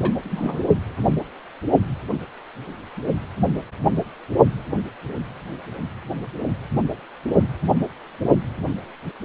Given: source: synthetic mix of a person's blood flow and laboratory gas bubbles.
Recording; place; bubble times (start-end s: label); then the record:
Doppler ultrasound of blood flow; precordium
0.00-0.12 s: bubbles
0.23-0.66 s: bubbles
From the record:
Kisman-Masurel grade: 221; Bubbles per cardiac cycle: several, 3 to 8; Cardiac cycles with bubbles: 10 to 50%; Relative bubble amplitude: barely perceptible (0.100 to 0.250); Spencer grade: 2 (many but less than half of the cardiac periods contain bubble signals, singularly or in groups); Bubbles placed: only in the low amplitude regions of the cardiac cycle